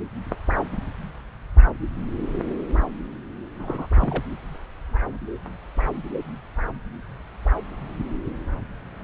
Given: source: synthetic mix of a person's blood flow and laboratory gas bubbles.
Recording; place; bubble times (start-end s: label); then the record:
Doppler ultrasound of blood flow; subclavian vein
3.58-3.87 s: bubbles
3.95-4.24 s: bubbles
From the record:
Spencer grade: 1 (occasional bubble signal discernible with the cardiac motion signal, with majority of cardiac periods free of bubbles); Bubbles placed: anywhere in the cardiac cycle